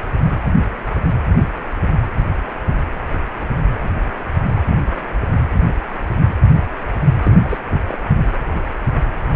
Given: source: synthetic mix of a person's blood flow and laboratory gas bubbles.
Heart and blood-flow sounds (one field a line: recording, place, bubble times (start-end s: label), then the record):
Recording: Doppler ultrasound of blood flow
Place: precordium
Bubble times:
7.22-7.39 s: bubbles
7.44-7.58 s: bubbles
7.64-7.78 s: bubbles
7.88-7.98 s: bubbles
From the record:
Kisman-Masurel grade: 212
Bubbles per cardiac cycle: several, 3 to 8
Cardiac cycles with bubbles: 1 to 10%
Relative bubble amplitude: moderate (0.250 to 0.450)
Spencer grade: 1 (occasional bubble signal discernible with the cardiac motion signal, with majority of cardiac periods free of bubbles)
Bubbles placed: anywhere in the cardiac cycle